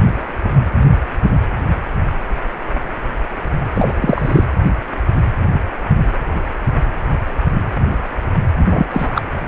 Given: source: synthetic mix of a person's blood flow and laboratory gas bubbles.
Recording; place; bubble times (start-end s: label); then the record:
Doppler ultrasound of blood flow; precordium
3.75-3.92 s: bubbles
4.00-4.44 s: bubbles
8.71-8.86 s: bubbles
8.91-9.08 s: bubbles
9.15-9.21 s: bubbles
From the record:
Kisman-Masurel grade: 213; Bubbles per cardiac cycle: several, 3 to 8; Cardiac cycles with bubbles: 1 to 10%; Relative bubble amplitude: loud (0.450 to 0.775); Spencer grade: 1 (occasional bubble signal discernible with the cardiac motion signal, with majority of cardiac periods free of bubbles); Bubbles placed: anywhere in the cardiac cycle